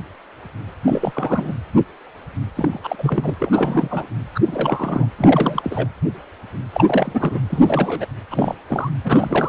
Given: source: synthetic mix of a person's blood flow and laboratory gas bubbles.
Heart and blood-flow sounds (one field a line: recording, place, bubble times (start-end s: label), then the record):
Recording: Doppler ultrasound of blood flow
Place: precordium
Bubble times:
0.85-1.52 s: bubbles
2.55-2.79 s: bubbles
2.83-3.34 s: bubbles
3.39-4.07 s: bubbles
4.34-4.40 s: bubbles
4.42-5.07 s: bubbles
5.17-5.88 s: bubbles
6.72-7.38 s: bubbles
7.49-8.06 s: bubbles
8.31-8.55 s: bubbles
8.69-8.90 s: bubbles
9.04-9.48 s: bubbles
From the record:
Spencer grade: 3 (all of the cardiac periods contain showers or single bubble signals, but not dominating or overriding the cardiac motion signals)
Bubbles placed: anywhere in the cardiac cycle